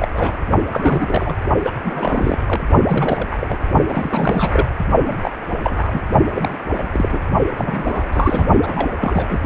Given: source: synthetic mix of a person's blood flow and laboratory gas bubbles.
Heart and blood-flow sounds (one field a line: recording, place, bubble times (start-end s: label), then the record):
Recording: Doppler ultrasound of blood flow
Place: precordium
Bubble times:
0.00-0.08 s: bubbles
0.14-0.42 s: bubbles
0.71-1.38 s: bubbles
1.62-1.71 s: bubbles
1.84-2.38 s: bubbles
2.46-2.61 s: bubbles
2.88-3.26 s: bubbles
3.32-3.38 s: bubbles
3.41-3.58 s: bubbles
3.88-4.66 s: bubbles
5.05-5.31 s: bubbles
5.64-6.00 s: bubbles
6.35-6.58 s: bubbles
6.73-6.88 s: bubbles
6.92-7.19 s: bubbles
7.57-8.08 s: bubbles
8.12-8.46 s: bubbles
8.62-9.41 s: bubbles
From the record:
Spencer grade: 3 (all of the cardiac periods contain showers or single bubble signals, but not dominating or overriding the cardiac motion signals)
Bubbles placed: only in the low amplitude regions of the cardiac cycle